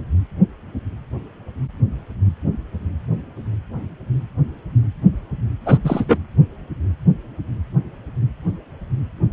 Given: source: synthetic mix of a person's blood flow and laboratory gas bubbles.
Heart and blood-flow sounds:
Doppler ultrasound of blood flow; precordium
5.66-5.78 s: bubbles
5.83-6.06 s: bubbles
6.08-6.17 s: bubbles
From the record:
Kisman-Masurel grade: 213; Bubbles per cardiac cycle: several, 3 to 8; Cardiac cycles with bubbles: 1 to 10%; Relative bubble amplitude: loud (0.450 to 0.775); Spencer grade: 1 (occasional bubble signal discernible with the cardiac motion signal, with majority of cardiac periods free of bubbles); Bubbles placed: anywhere in the cardiac cycle

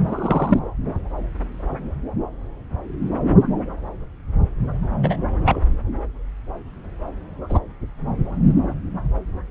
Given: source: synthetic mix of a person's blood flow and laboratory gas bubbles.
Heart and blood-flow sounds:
Doppler ultrasound of blood flow; subclavian vein
0.08-0.59 s: bubbles
5.03-5.17 s: bubbles
5.45-5.61 s: bubbles
7.49-7.59 s: bubbles
From the record:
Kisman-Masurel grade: 123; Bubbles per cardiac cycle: 1 to 2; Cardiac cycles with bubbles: 10 to 50%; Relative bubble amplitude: loud (0.450 to 0.775); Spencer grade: 2 (many but less than half of the cardiac periods contain bubble signals, singularly or in groups); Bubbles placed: anywhere in the cardiac cycle

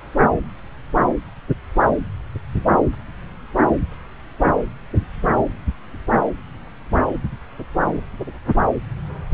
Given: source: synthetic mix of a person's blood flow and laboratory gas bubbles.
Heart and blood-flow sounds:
Doppler ultrasound of blood flow; subclavian vein
no bubbles
From the record:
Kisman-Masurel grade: 000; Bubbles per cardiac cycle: 0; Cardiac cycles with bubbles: 0%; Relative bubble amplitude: no bubbles discernible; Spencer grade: 0 (complete lack of bubble signals)

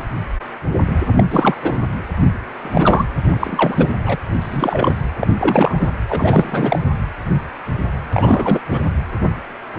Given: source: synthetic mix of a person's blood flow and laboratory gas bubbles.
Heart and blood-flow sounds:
Doppler ultrasound of blood flow; precordium
1.12-1.24 s: bubbles
1.31-1.54 s: bubbles
1.62-1.79 s: bubbles
2.62-3.06 s: bubbles
3.25-3.90 s: bubbles
4.04-4.17 s: bubbles
4.33-4.96 s: bubbles
5.19-5.92 s: bubbles
6.07-6.79 s: bubbles
8.12-8.59 s: bubbles
8.70-8.81 s: bubbles
From the record:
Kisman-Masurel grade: 333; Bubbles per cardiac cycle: rolling drumbeat, 9 or more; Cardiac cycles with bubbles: 50 to 99%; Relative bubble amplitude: loud (0.450 to 0.775); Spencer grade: 3 (all of the cardiac periods contain showers or single bubble signals, but not dominating or overriding the cardiac motion signals); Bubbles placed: anywhere in the cardiac cycle

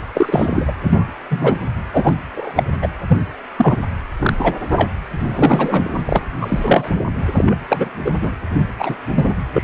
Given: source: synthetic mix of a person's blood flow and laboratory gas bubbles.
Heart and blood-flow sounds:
Doppler ultrasound of blood flow; precordium
0.15-0.73 s: bubbles
0.81-1.06 s: bubbles
1.30-1.57 s: bubbles
1.91-2.14 s: bubbles
2.36-2.51 s: bubbles
2.55-2.63 s: bubbles
2.82-2.88 s: bubbles
3.08-3.18 s: bubbles
3.57-3.77 s: bubbles
4.20-4.33 s: bubbles
4.38-4.56 s: bubbles
4.71-4.90 s: bubbles
5.19-5.98 s: bubbles
6.05-6.24 s: bubbles
6.40-6.89 s: bubbles
7.34-7.58 s: bubbles
7.68-7.88 s: bubbles
8.04-8.12 s: bubbles
8.21-8.30 s: bubbles
8.79-8.96 s: bubbles
9.14-9.34 s: bubbles
9.53-9.63 s: bubbles
From the record:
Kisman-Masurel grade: 243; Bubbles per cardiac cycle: several, 3 to 8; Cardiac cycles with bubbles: 100%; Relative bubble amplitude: loud (0.450 to 0.775); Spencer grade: 3 (all of the cardiac periods contain showers or single bubble signals, but not dominating or overriding the cardiac motion signals); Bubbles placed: anywhere in the cardiac cycle

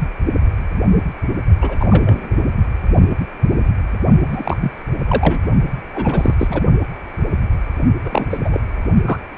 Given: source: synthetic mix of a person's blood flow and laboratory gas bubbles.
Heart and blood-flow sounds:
Doppler ultrasound of blood flow; precordium
1.61-1.76 s: bubbles
1.80-1.86 s: bubbles
1.90-2.34 s: bubbles
4.30-4.57 s: bubbles
4.60-4.72 s: bubbles
5.08-5.43 s: bubbles
5.94-6.34 s: bubbles
6.38-6.62 s: bubbles
8.06-8.28 s: bubbles
8.31-8.39 s: bubbles
8.44-8.60 s: bubbles
9.04-9.17 s: bubbles
From the record:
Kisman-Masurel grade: 233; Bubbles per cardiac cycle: several, 3 to 8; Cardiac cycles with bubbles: 50 to 99%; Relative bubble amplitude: loud (0.450 to 0.775); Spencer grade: 3 (all of the cardiac periods contain showers or single bubble signals, but not dominating or overriding the cardiac motion signals); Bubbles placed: only in the low amplitude regions of the cardiac cycle

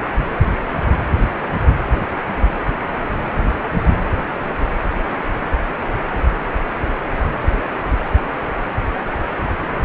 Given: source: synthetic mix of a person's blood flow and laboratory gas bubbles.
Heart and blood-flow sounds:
Doppler ultrasound of blood flow; precordium
no bubbles
From the record:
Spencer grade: 0 (complete lack of bubble signals)

